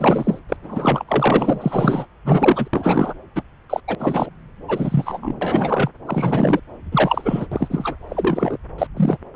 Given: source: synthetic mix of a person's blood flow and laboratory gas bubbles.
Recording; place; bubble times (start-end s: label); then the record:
Doppler ultrasound of blood flow; subclavian vein
0.00-0.40 s: bubbles
0.48-0.57 s: bubbles
0.63-1.04 s: bubbles
1.08-2.06 s: bubbles
2.25-2.68 s: bubbles
2.73-3.14 s: bubbles
3.35-3.43 s: bubbles
3.69-3.81 s: bubbles
3.88-3.95 s: bubbles
3.99-4.29 s: bubbles
4.68-5.18 s: bubbles
5.21-5.34 s: bubbles
5.41-5.89 s: bubbles
6.07-6.60 s: bubbles
6.92-7.46 s: bubbles
7.51-7.96 s: bubbles
8.10-8.57 s: bubbles
8.78-8.87 s: bubbles
8.96-9.17 s: bubbles
9.34-9.36 s: bubbles
From the record:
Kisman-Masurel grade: 242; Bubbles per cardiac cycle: several, 3 to 8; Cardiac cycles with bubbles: 100%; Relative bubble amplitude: moderate (0.250 to 0.450); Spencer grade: 3 (all of the cardiac periods contain showers or single bubble signals, but not dominating or overriding the cardiac motion signals); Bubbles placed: anywhere in the cardiac cycle